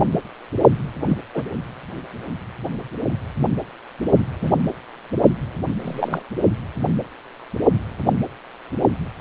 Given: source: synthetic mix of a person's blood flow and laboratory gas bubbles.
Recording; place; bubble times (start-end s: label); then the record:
Doppler ultrasound of blood flow; precordium
1.05-1.17 s: bubbles
1.34-1.43 s: bubbles
4.41-4.52 s: bubbles
5.82-6.22 s: bubbles
From the record:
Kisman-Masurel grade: 122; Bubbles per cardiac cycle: 1 to 2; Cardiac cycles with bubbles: 10 to 50%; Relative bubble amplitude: moderate (0.250 to 0.450); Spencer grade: 2 (many but less than half of the cardiac periods contain bubble signals, singularly or in groups); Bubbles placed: only in the low amplitude regions of the cardiac cycle